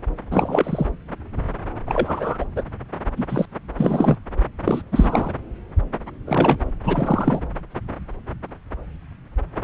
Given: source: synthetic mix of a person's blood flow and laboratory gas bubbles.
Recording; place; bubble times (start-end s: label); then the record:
Doppler ultrasound of blood flow; subclavian vein
0.31-0.86 s: bubbles
1.86-2.45 s: bubbles
2.56-2.62 s: bubbles
3.17-3.25 s: bubbles
3.29-3.46 s: bubbles
3.77-4.17 s: bubbles
4.64-4.82 s: bubbles
4.92-5.33 s: bubbles
6.25-6.70 s: bubbles
6.84-7.40 s: bubbles
From the record:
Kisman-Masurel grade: 222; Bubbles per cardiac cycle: several, 3 to 8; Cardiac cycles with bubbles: 10 to 50%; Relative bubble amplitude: moderate (0.250 to 0.450); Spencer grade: 2 (many but less than half of the cardiac periods contain bubble signals, singularly or in groups); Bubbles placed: anywhere in the cardiac cycle